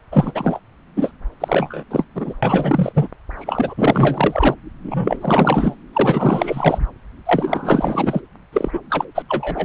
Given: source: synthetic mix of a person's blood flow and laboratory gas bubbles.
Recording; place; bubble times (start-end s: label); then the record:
Doppler ultrasound of blood flow; subclavian vein
0.11-0.32 s: bubbles
0.34-0.59 s: bubbles
0.96-1.11 s: bubbles
1.40-1.84 s: bubbles
1.91-2.06 s: bubbles
2.15-2.34 s: bubbles
2.42-3.08 s: bubbles
3.38-4.55 s: bubbles
4.84-5.75 s: bubbles
5.93-6.86 s: bubbles
7.25-8.21 s: bubbles
8.53-8.79 s: bubbles
8.90-9.05 s: bubbles
9.14-9.22 s: bubbles
9.28-9.65 s: bubbles
From the record:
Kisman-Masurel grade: 444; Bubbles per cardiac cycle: continuous sound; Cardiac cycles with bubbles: 100%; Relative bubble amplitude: maximal (0.775 to 0.999); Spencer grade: 4 (maximum detectable bubble signal sounding continuously throughout systole and diastole of every cardiac period, and overriding the amplitude of the normal cardiac signals); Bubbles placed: anywhere in the cardiac cycle